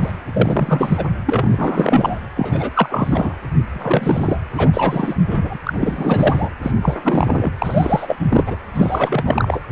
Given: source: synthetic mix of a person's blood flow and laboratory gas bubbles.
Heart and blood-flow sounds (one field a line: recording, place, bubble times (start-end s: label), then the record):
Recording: Doppler ultrasound of blood flow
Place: precordium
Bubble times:
0.00-0.12 s: bubbles
0.34-1.05 s: bubbles
1.26-2.27 s: bubbles
2.36-2.71 s: bubbles
2.75-3.36 s: bubbles
3.69-4.38 s: bubbles
4.54-4.71 s: bubbles
4.74-5.17 s: bubbles
5.30-5.58 s: bubbles
5.63-6.49 s: bubbles
6.62-6.71 s: bubbles
6.83-7.01 s: bubbles
7.04-7.52 s: bubbles
7.58-8.16 s: bubbles
8.30-8.56 s: bubbles
8.74-9.61 s: bubbles
From the record:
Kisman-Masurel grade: 343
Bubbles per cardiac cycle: rolling drumbeat, 9 or more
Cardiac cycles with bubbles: 100%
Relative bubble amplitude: loud (0.450 to 0.775)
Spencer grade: 3 (all of the cardiac periods contain showers or single bubble signals, but not dominating or overriding the cardiac motion signals)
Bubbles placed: anywhere in the cardiac cycle